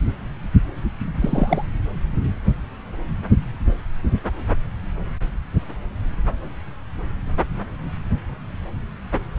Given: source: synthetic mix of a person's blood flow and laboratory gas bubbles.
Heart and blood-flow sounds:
Doppler ultrasound of blood flow; subclavian vein
1.21-1.65 s: bubbles
From the record:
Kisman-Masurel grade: 122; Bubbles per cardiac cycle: 1 to 2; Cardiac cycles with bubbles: 10 to 50%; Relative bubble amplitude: moderate (0.250 to 0.450); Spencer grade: 2 (many but less than half of the cardiac periods contain bubble signals, singularly or in groups); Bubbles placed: anywhere in the cardiac cycle

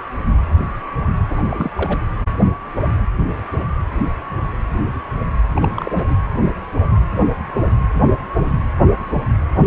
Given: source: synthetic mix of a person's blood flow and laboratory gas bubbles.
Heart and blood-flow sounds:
Doppler ultrasound of blood flow; precordium
1.29-1.71 s: bubbles
1.75-2.02 s: bubbles
5.55-6.16 s: bubbles
From the record:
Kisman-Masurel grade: 222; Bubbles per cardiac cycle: several, 3 to 8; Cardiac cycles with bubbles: 10 to 50%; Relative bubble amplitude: moderate (0.250 to 0.450); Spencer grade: 2 (many but less than half of the cardiac periods contain bubble signals, singularly or in groups); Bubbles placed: anywhere in the cardiac cycle

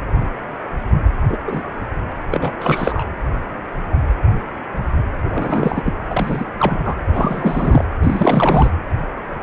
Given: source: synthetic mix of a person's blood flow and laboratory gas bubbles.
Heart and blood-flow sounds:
Doppler ultrasound of blood flow; precordium
1.28-1.38 s: bubbles
1.47-1.62 s: bubbles
2.31-2.52 s: bubbles
2.60-3.04 s: bubbles
5.23-5.82 s: bubbles
5.85-5.91 s: bubbles
6.09-6.45 s: bubbles
6.57-6.80 s: bubbles
6.84-6.95 s: bubbles
7.12-7.84 s: bubbles
8.03-8.71 s: bubbles
From the record:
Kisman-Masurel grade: 232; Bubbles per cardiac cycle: several, 3 to 8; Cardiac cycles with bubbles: 50 to 99%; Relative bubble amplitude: moderate (0.250 to 0.450); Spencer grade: 3 (all of the cardiac periods contain showers or single bubble signals, but not dominating or overriding the cardiac motion signals); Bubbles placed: anywhere in the cardiac cycle

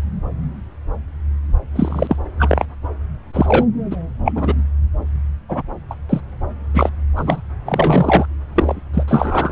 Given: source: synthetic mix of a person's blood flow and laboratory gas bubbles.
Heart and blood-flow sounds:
Doppler ultrasound of blood flow; subclavian vein
1.75-2.16 s: bubbles
2.39-2.66 s: bubbles
3.33-3.66 s: bubbles
3.91-3.96 s: bubbles
4.25-4.32 s: bubbles
4.34-4.54 s: bubbles
5.49-5.62 s: bubbles
5.90-5.95 s: bubbles
6.09-6.21 s: bubbles
6.74-6.90 s: bubbles
7.16-7.41 s: bubbles
7.66-8.26 s: bubbles
8.54-8.80 s: bubbles
8.94-9.04 s: bubbles
9.07-9.52 s: bubbles
From the record:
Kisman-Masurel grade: 233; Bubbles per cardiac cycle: several, 3 to 8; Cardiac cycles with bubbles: 50 to 99%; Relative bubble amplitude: loud (0.450 to 0.775); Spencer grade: 3 (all of the cardiac periods contain showers or single bubble signals, but not dominating or overriding the cardiac motion signals); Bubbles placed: anywhere in the cardiac cycle

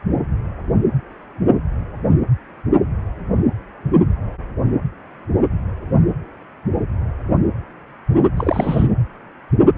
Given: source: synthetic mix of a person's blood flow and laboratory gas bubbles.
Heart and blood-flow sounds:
Doppler ultrasound of blood flow; precordium
8.37-8.88 s: bubbles
From the record:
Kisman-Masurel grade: 212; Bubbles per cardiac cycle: several, 3 to 8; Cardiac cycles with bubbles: 1 to 10%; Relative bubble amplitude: moderate (0.250 to 0.450); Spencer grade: 1 (occasional bubble signal discernible with the cardiac motion signal, with majority of cardiac periods free of bubbles); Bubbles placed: anywhere in the cardiac cycle

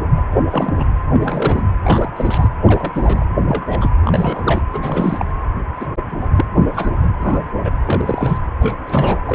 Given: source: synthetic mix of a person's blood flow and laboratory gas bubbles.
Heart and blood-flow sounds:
Doppler ultrasound of blood flow; precordium
0.17-0.20 s: bubbles
0.31-0.42 s: bubbles
0.51-0.84 s: bubbles
1.12-1.63 s: bubbles
1.84-2.08 s: bubbles
2.16-2.48 s: bubbles
2.67-3.25 s: bubbles
3.42-3.89 s: bubbles
4.05-4.62 s: bubbles
4.73-5.25 s: bubbles
5.79-5.87 s: bubbles
6.08-6.26 s: bubbles
6.36-6.45 s: bubbles
6.75-6.93 s: bubbles
7.03-7.08 s: bubbles
7.20-7.43 s: bubbles
7.64-7.70 s: bubbles
7.85-8.38 s: bubbles
8.59-8.74 s: bubbles
8.86-9.20 s: bubbles
9.26-9.35 s: bubbles
From the record:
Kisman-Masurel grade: 242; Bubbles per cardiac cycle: several, 3 to 8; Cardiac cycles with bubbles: 100%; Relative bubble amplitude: moderate (0.250 to 0.450); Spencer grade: 3 (all of the cardiac periods contain showers or single bubble signals, but not dominating or overriding the cardiac motion signals); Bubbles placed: anywhere in the cardiac cycle

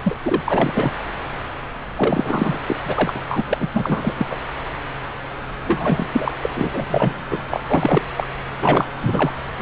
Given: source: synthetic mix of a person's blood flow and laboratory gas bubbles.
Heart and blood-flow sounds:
Doppler ultrasound of blood flow; subclavian vein
0.04-0.15 s: bubbles
0.25-0.42 s: bubbles
0.45-0.91 s: bubbles
1.97-2.59 s: bubbles
2.67-2.76 s: bubbles
2.85-3.22 s: bubbles
3.29-3.44 s: bubbles
3.49-3.68 s: bubbles
3.73-4.14 s: bubbles
4.17-4.26 s: bubbles
4.30-4.36 s: bubbles
5.66-6.07 s: bubbles
6.12-6.32 s: bubbles
6.42-6.50 s: bubbles
6.54-6.85 s: bubbles
6.90-7.14 s: bubbles
7.30-7.42 s: bubbles
7.50-7.62 s: bubbles
7.67-8.02 s: bubbles
8.17-8.28 s: bubbles
8.62-8.87 s: bubbles
9.01-9.32 s: bubbles
9.59-9.62 s: bubbles
From the record:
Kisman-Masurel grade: 333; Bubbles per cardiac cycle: rolling drumbeat, 9 or more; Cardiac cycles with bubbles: 50 to 99%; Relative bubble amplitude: loud (0.450 to 0.775); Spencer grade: 3 (all of the cardiac periods contain showers or single bubble signals, but not dominating or overriding the cardiac motion signals); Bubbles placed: anywhere in the cardiac cycle

